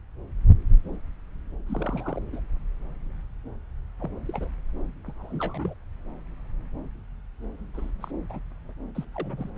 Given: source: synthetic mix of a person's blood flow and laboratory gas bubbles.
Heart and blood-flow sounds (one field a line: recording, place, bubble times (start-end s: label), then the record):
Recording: Doppler ultrasound of blood flow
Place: subclavian vein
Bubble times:
1.67-2.19 s: bubbles
2.32-2.40 s: bubbles
4.00-4.10 s: bubbles
4.25-4.50 s: bubbles
5.06-5.12 s: bubbles
5.17-5.74 s: bubbles
7.74-7.90 s: bubbles
8.01-8.11 s: bubbles
8.29-8.40 s: bubbles
8.95-9.04 s: bubbles
9.14-9.48 s: bubbles
9.56-9.58 s: bubbles
From the record:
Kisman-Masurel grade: 221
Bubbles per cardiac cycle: several, 3 to 8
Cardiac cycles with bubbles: 10 to 50%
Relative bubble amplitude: barely perceptible (0.100 to 0.250)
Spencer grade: 2 (many but less than half of the cardiac periods contain bubble signals, singularly or in groups)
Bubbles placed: anywhere in the cardiac cycle